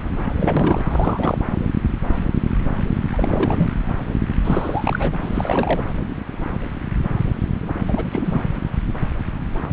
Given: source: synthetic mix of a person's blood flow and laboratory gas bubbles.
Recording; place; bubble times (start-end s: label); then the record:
Doppler ultrasound of blood flow; subclavian vein
0.31-0.80 s: bubbles
0.90-1.38 s: bubbles
3.13-3.69 s: bubbles
4.43-5.12 s: bubbles
5.21-5.83 s: bubbles
7.88-8.43 s: bubbles
From the record:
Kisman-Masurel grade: 332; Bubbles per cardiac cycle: rolling drumbeat, 9 or more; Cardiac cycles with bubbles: 50 to 99%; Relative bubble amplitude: moderate (0.250 to 0.450); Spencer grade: 3 (all of the cardiac periods contain showers or single bubble signals, but not dominating or overriding the cardiac motion signals); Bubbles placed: anywhere in the cardiac cycle